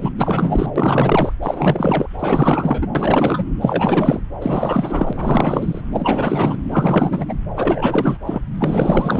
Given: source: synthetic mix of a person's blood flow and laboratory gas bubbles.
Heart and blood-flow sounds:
Doppler ultrasound of blood flow; subclavian vein
0.00-0.11 s: bubbles
0.17-0.73 s: bubbles
0.76-1.32 s: bubbles
1.42-2.07 s: bubbles
2.19-2.88 s: bubbles
2.95-3.53 s: bubbles
3.60-4.21 s: bubbles
4.41-5.13 s: bubbles
5.17-5.81 s: bubbles
5.92-6.59 s: bubbles
6.70-7.25 s: bubbles
7.29-7.33 s: bubbles
7.56-8.18 s: bubbles
8.26-8.42 s: bubbles
8.56-9.20 s: bubbles
From the record:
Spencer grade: 4 (maximum detectable bubble signal sounding continuously throughout systole and diastole of every cardiac period, and overriding the amplitude of the normal cardiac signals); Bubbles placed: anywhere in the cardiac cycle

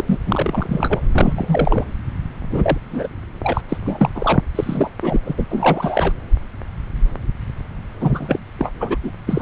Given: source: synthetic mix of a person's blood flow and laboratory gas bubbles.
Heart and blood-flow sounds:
Doppler ultrasound of blood flow; subclavian vein
0.00-0.04 s: bubbles
0.07-0.20 s: bubbles
0.26-1.01 s: bubbles
1.13-1.84 s: bubbles
2.51-2.78 s: bubbles
2.86-3.07 s: bubbles
3.43-3.61 s: bubbles
3.69-3.77 s: bubbles
3.84-4.10 s: bubbles
4.14-4.40 s: bubbles
4.55-4.91 s: bubbles
5.02-5.20 s: bubbles
5.25-5.34 s: bubbles
5.37-5.46 s: bubbles
5.49-6.14 s: bubbles
8.00-8.39 s: bubbles
8.58-8.71 s: bubbles
8.80-8.96 s: bubbles
9.04-9.11 s: bubbles
9.27-9.42 s: bubbles
From the record:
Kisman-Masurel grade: 333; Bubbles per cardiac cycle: rolling drumbeat, 9 or more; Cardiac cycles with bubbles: 50 to 99%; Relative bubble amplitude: loud (0.450 to 0.775); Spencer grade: 3 (all of the cardiac periods contain showers or single bubble signals, but not dominating or overriding the cardiac motion signals); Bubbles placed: anywhere in the cardiac cycle

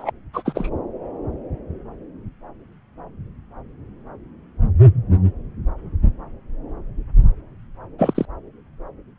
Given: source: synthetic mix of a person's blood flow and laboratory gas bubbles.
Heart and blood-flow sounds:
Doppler ultrasound of blood flow; subclavian vein
0.00-0.11 s: bubbles
0.33-0.43 s: bubbles
0.45-0.69 s: bubbles
7.98-8.25 s: bubbles
From the record:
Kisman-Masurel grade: 222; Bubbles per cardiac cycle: several, 3 to 8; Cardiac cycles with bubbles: 10 to 50%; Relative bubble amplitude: moderate (0.250 to 0.450); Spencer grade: 2 (many but less than half of the cardiac periods contain bubble signals, singularly or in groups); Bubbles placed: anywhere in the cardiac cycle

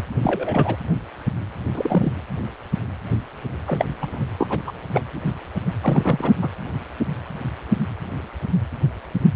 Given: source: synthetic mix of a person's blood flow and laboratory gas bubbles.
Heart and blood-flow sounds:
Doppler ultrasound of blood flow; precordium
0.22-0.76 s: bubbles
1.73-2.12 s: bubbles
3.66-3.85 s: bubbles
4.00-4.25 s: bubbles
4.38-4.47 s: bubbles
4.50-4.61 s: bubbles
4.67-4.72 s: bubbles
4.92-5.02 s: bubbles
5.81-6.33 s: bubbles
6.42-6.48 s: bubbles
From the record:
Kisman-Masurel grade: 222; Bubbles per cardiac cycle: several, 3 to 8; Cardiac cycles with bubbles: 10 to 50%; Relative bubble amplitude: moderate (0.250 to 0.450); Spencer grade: 2 (many but less than half of the cardiac periods contain bubble signals, singularly or in groups); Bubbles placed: anywhere in the cardiac cycle

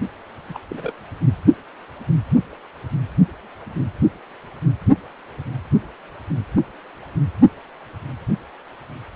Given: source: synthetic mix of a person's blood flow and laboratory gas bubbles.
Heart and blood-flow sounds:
Doppler ultrasound of blood flow; precordium
0.49-0.59 s: bubbles
0.69-0.93 s: bubbles
From the record:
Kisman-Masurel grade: 211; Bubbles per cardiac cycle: several, 3 to 8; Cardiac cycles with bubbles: 1 to 10%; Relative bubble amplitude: barely perceptible (0.100 to 0.250); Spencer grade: 1 (occasional bubble signal discernible with the cardiac motion signal, with majority of cardiac periods free of bubbles); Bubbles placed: anywhere in the cardiac cycle

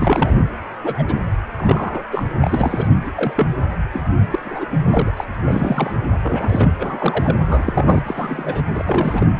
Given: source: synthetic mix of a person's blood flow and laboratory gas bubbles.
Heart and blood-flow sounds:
Doppler ultrasound of blood flow; precordium
0.00-0.45 s: bubbles
0.83-1.03 s: bubbles
1.08-1.14 s: bubbles
1.58-2.03 s: bubbles
2.11-2.23 s: bubbles
2.42-2.88 s: bubbles
3.06-3.11 s: bubbles
3.15-3.47 s: bubbles
3.93-4.02 s: bubbles
4.30-4.39 s: bubbles
4.45-4.66 s: bubbles
4.85-5.12 s: bubbles
5.17-5.25 s: bubbles
5.46-5.95 s: bubbles
6.22-6.73 s: bubbles
6.79-7.36 s: bubbles
7.46-8.03 s: bubbles
8.05-8.62 s: bubbles
8.71-9.27 s: bubbles
From the record:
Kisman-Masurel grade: 242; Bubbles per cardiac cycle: several, 3 to 8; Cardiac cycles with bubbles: 100%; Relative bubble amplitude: moderate (0.250 to 0.450); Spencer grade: 3 (all of the cardiac periods contain showers or single bubble signals, but not dominating or overriding the cardiac motion signals); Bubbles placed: anywhere in the cardiac cycle

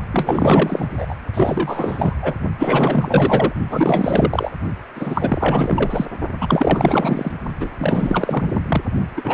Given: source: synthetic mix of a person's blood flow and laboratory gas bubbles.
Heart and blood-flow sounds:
Doppler ultrasound of blood flow; precordium
0.12-1.15 s: bubbles
1.34-2.17 s: bubbles
2.21-2.34 s: bubbles
2.58-3.52 s: bubbles
3.70-4.52 s: bubbles
4.95-6.05 s: bubbles
6.41-7.32 s: bubbles
7.60-7.69 s: bubbles
7.78-8.51 s: bubbles
8.54-8.61 s: bubbles
8.67-8.82 s: bubbles
9.17-9.34 s: bubbles
From the record:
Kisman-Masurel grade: 444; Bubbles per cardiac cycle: continuous sound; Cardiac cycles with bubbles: 100%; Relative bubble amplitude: maximal (0.775 to 0.999); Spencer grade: 4 (maximum detectable bubble signal sounding continuously throughout systole and diastole of every cardiac period, and overriding the amplitude of the normal cardiac signals); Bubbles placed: only in the low amplitude regions of the cardiac cycle

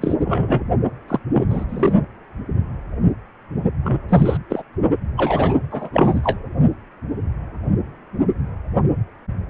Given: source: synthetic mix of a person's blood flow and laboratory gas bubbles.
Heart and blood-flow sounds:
Doppler ultrasound of blood flow; precordium
0.00-0.16 s: bubbles
0.20-0.64 s: bubbles
1.08-1.19 s: bubbles
1.31-1.48 s: bubbles
1.50-1.65 s: bubbles
1.69-1.93 s: bubbles
3.83-4.00 s: bubbles
4.08-4.37 s: bubbles
4.50-4.62 s: bubbles
5.17-5.55 s: bubbles
5.71-5.90 s: bubbles
5.93-6.38 s: bubbles
From the record:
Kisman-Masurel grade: 233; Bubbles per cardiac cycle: several, 3 to 8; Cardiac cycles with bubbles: 50 to 99%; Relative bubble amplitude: loud (0.450 to 0.775); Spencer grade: 3 (all of the cardiac periods contain showers or single bubble signals, but not dominating or overriding the cardiac motion signals); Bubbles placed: only in the low amplitude regions of the cardiac cycle

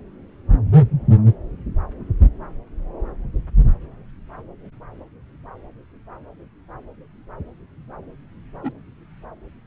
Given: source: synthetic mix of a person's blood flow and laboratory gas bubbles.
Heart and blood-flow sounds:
Doppler ultrasound of blood flow; subclavian vein
8.62-8.72 s: bubbles
From the record:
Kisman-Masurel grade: 111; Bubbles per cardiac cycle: 1 to 2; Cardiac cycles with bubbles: 1 to 10%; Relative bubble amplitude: barely perceptible (0.100 to 0.250); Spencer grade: 1 (occasional bubble signal discernible with the cardiac motion signal, with majority of cardiac periods free of bubbles); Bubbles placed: anywhere in the cardiac cycle

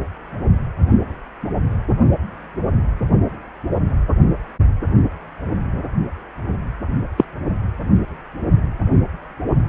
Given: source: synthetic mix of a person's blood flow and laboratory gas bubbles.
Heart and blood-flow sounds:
Doppler ultrasound of blood flow; precordium
7.17-7.25 s: bubbles
From the record:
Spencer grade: 1 (occasional bubble signal discernible with the cardiac motion signal, with majority of cardiac periods free of bubbles); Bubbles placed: anywhere in the cardiac cycle

